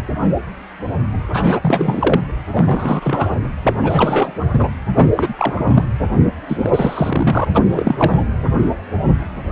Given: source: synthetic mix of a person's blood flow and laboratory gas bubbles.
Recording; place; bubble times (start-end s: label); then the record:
Doppler ultrasound of blood flow; precordium
1.33-2.20 s: bubbles
2.51-3.49 s: bubbles
3.62-4.33 s: bubbles
4.53-4.70 s: bubbles
4.97-5.10 s: bubbles
5.16-5.33 s: bubbles
5.38-5.86 s: bubbles
6.44-7.45 s: bubbles
7.54-8.24 s: bubbles
From the record:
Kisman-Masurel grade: 333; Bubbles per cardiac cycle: rolling drumbeat, 9 or more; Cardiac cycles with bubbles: 50 to 99%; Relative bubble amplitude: loud (0.450 to 0.775); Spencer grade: 3 (all of the cardiac periods contain showers or single bubble signals, but not dominating or overriding the cardiac motion signals); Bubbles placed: anywhere in the cardiac cycle